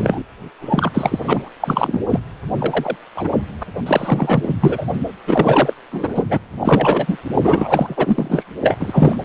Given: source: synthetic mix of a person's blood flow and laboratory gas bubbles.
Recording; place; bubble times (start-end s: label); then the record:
Doppler ultrasound of blood flow; precordium
0.00-0.23 s: bubbles
0.61-0.90 s: bubbles
0.94-1.19 s: bubbles
1.24-1.49 s: bubbles
1.60-2.04 s: bubbles
2.08-2.19 s: bubbles
2.59-2.95 s: bubbles
3.15-3.28 s: bubbles
3.60-3.64 s: bubbles
3.86-4.54 s: bubbles
4.61-4.86 s: bubbles
5.27-5.74 s: bubbles
5.92-6.25 s: bubbles
6.29-6.39 s: bubbles
6.61-7.18 s: bubbles
7.33-8.44 s: bubbles
8.61-9.16 s: bubbles
From the record:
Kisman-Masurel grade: 243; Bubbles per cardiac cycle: several, 3 to 8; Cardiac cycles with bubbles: 100%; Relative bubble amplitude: loud (0.450 to 0.775); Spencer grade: 3 (all of the cardiac periods contain showers or single bubble signals, but not dominating or overriding the cardiac motion signals); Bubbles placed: anywhere in the cardiac cycle